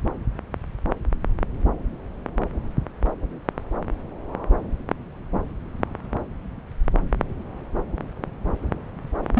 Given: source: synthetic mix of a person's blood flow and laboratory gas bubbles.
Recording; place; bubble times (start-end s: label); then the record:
Doppler ultrasound of blood flow; subclavian vein
9.35-9.40 s: bubbles
From the record:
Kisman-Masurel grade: 122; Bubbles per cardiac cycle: 1 to 2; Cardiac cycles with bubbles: 10 to 50%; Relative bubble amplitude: moderate (0.250 to 0.450); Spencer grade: 2 (many but less than half of the cardiac periods contain bubble signals, singularly or in groups); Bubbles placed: anywhere in the cardiac cycle